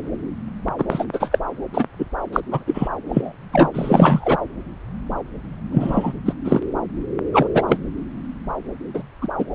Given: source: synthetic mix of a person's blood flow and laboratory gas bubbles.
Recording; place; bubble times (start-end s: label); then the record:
Doppler ultrasound of blood flow; subclavian vein
0.78-0.85 s: bubbles
0.89-1.05 s: bubbles
1.13-1.39 s: bubbles
1.74-1.85 s: bubbles
1.99-2.06 s: bubbles
2.33-2.41 s: bubbles
2.51-2.64 s: bubbles
2.67-2.88 s: bubbles
3.08-3.33 s: bubbles
3.52-3.71 s: bubbles
3.73-4.36 s: bubbles
5.71-6.13 s: bubbles
6.25-6.33 s: bubbles
6.44-6.60 s: bubbles
7.33-7.48 s: bubbles
7.54-7.62 s: bubbles
7.67-7.77 s: bubbles
8.94-9.03 s: bubbles
9.21-9.27 s: bubbles
9.38-9.46 s: bubbles
From the record:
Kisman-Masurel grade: 233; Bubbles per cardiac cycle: several, 3 to 8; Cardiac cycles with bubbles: 50 to 99%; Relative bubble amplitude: loud (0.450 to 0.775); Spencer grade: 3 (all of the cardiac periods contain showers or single bubble signals, but not dominating or overriding the cardiac motion signals); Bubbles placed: anywhere in the cardiac cycle